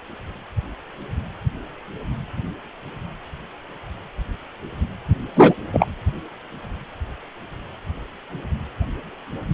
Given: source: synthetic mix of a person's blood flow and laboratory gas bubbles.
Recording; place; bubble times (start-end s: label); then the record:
Doppler ultrasound of blood flow; precordium
5.36-5.55 s: bubbles
5.73-5.88 s: bubbles
From the record:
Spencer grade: 1 (occasional bubble signal discernible with the cardiac motion signal, with majority of cardiac periods free of bubbles); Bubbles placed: anywhere in the cardiac cycle